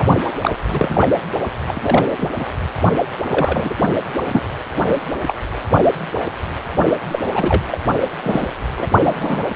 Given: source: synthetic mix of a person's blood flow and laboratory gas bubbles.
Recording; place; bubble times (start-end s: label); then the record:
Doppler ultrasound of blood flow; precordium
0.00-0.04 s: bubbles
0.40-0.51 s: bubbles
0.70-1.08 s: bubbles
1.68-2.29 s: bubbles
2.38-2.46 s: bubbles
3.24-3.75 s: bubbles
4.28-4.41 s: bubbles
4.87-5.08 s: bubbles
5.27-5.35 s: bubbles
7.11-7.20 s: bubbles
7.35-7.78 s: bubbles
8.23-8.54 s: bubbles
8.78-8.87 s: bubbles
9.04-9.56 s: bubbles
From the record:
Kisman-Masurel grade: 232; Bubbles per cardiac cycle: several, 3 to 8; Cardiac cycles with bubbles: 50 to 99%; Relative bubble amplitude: moderate (0.250 to 0.450); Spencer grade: 3 (all of the cardiac periods contain showers or single bubble signals, but not dominating or overriding the cardiac motion signals); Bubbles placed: only in the low amplitude regions of the cardiac cycle